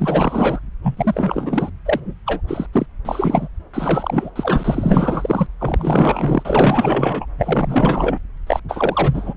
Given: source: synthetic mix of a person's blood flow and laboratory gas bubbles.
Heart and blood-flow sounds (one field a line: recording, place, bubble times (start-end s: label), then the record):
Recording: Doppler ultrasound of blood flow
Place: subclavian vein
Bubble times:
0.00-0.59 s: bubbles
0.83-1.71 s: bubbles
1.85-2.15 s: bubbles
2.26-2.41 s: bubbles
2.47-2.67 s: bubbles
2.73-2.86 s: bubbles
3.05-3.48 s: bubbles
3.74-4.30 s: bubbles
4.35-5.46 s: bubbles
5.59-7.25 s: bubbles
7.38-8.18 s: bubbles
8.47-8.60 s: bubbles
8.69-9.34 s: bubbles
From the record:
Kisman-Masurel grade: 444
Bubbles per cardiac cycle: continuous sound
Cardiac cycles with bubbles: 100%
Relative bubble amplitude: maximal (0.775 to 0.999)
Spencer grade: 4 (maximum detectable bubble signal sounding continuously throughout systole and diastole of every cardiac period, and overriding the amplitude of the normal cardiac signals)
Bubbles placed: anywhere in the cardiac cycle